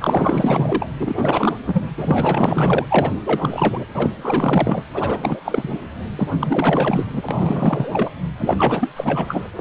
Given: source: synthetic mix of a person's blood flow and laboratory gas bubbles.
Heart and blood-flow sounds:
Doppler ultrasound of blood flow; precordium
0.00-0.89 s: bubbles
1.00-1.54 s: bubbles
1.66-1.85 s: bubbles
1.97-2.86 s: bubbles
2.89-3.12 s: bubbles
3.25-3.79 s: bubbles
3.94-4.84 s: bubbles
4.94-5.41 s: bubbles
5.45-5.81 s: bubbles
6.17-6.29 s: bubbles
6.40-7.05 s: bubbles
7.12-7.23 s: bubbles
7.29-8.11 s: bubbles
8.37-8.89 s: bubbles
8.96-9.47 s: bubbles
9.55-9.61 s: bubbles
From the record:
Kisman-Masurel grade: 444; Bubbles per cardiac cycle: continuous sound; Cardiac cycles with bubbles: 100%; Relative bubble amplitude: maximal (0.775 to 0.999); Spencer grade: 4 (maximum detectable bubble signal sounding continuously throughout systole and diastole of every cardiac period, and overriding the amplitude of the normal cardiac signals); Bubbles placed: anywhere in the cardiac cycle

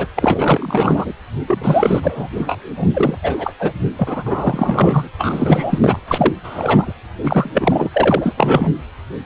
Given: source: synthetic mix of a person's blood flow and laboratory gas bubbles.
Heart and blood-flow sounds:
Doppler ultrasound of blood flow; precordium
0.00-0.07 s: bubbles
0.16-1.13 s: bubbles
1.47-1.59 s: bubbles
1.61-2.00 s: bubbles
2.03-2.28 s: bubbles
2.33-2.70 s: bubbles
2.77-2.89 s: bubbles
2.93-3.17 s: bubbles
3.22-3.55 s: bubbles
3.59-3.72 s: bubbles
3.96-5.08 s: bubbles
5.18-5.99 s: bubbles
6.08-6.33 s: bubbles
6.43-6.93 s: bubbles
7.22-7.89 s: bubbles
7.92-8.33 s: bubbles
8.37-8.71 s: bubbles
From the record:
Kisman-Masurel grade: 343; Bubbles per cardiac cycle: rolling drumbeat, 9 or more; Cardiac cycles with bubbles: 100%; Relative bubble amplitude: loud (0.450 to 0.775); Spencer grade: 3 (all of the cardiac periods contain showers or single bubble signals, but not dominating or overriding the cardiac motion signals); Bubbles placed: anywhere in the cardiac cycle

